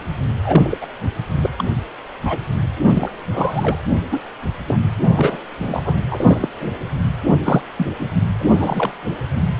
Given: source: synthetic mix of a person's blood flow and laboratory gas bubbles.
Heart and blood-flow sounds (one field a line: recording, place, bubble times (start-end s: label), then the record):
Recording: Doppler ultrasound of blood flow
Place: precordium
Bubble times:
0.43-0.78 s: bubbles
0.81-0.87 s: bubbles
1.42-1.50 s: bubbles
1.58-1.64 s: bubbles
2.25-2.39 s: bubbles
2.76-3.10 s: bubbles
3.33-3.80 s: bubbles
4.11-4.22 s: bubbles
4.66-4.77 s: bubbles
5.05-5.39 s: bubbles
5.59-5.83 s: bubbles
5.85-5.96 s: bubbles
6.11-6.49 s: bubbles
6.60-6.69 s: bubbles
7.44-7.62 s: bubbles
7.77-7.92 s: bubbles
8.00-8.08 s: bubbles
8.39-8.92 s: bubbles
9.57-9.60 s: bubbles
From the record:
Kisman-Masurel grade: 242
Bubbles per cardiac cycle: several, 3 to 8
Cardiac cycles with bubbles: 100%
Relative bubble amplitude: moderate (0.250 to 0.450)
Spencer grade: 3 (all of the cardiac periods contain showers or single bubble signals, but not dominating or overriding the cardiac motion signals)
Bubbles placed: anywhere in the cardiac cycle